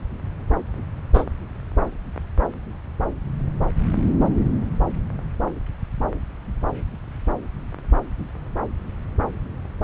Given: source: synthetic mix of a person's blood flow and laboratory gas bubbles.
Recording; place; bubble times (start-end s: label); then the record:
Doppler ultrasound of blood flow; subclavian vein
1.14-1.25 s: bubbles
From the record:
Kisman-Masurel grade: 123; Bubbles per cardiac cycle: 1 to 2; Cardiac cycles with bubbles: 10 to 50%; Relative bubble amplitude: loud (0.450 to 0.775); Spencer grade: 2 (many but less than half of the cardiac periods contain bubble signals, singularly or in groups); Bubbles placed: anywhere in the cardiac cycle